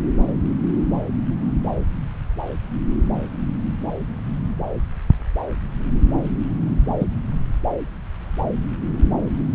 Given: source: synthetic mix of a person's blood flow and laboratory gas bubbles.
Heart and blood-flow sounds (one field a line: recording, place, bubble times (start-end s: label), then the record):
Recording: Doppler ultrasound of blood flow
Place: subclavian vein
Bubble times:
7.00-7.05 s: bubbles
From the record:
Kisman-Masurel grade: 113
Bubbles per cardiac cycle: 1 to 2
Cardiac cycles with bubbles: 1 to 10%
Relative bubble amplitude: loud (0.450 to 0.775)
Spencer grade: 1 (occasional bubble signal discernible with the cardiac motion signal, with majority of cardiac periods free of bubbles)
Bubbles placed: anywhere in the cardiac cycle